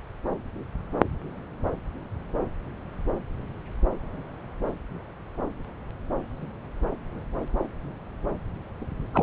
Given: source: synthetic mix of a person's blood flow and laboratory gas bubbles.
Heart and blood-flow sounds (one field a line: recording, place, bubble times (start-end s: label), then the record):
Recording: Doppler ultrasound of blood flow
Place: subclavian vein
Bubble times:
9.13-9.23 s: bubbles
From the record:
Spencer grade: 1 (occasional bubble signal discernible with the cardiac motion signal, with majority of cardiac periods free of bubbles)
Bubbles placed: anywhere in the cardiac cycle